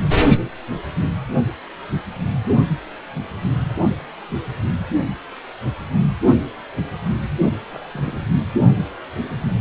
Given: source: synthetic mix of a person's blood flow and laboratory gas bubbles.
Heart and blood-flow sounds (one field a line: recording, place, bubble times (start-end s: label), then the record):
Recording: Doppler ultrasound of blood flow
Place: precordium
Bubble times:
7.70-7.89 s: bubbles
7.94-8.28 s: bubbles
From the record:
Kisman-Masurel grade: 211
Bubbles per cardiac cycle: several, 3 to 8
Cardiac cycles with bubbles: 1 to 10%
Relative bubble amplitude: barely perceptible (0.100 to 0.250)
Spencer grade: 1 (occasional bubble signal discernible with the cardiac motion signal, with majority of cardiac periods free of bubbles)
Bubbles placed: only in the low amplitude regions of the cardiac cycle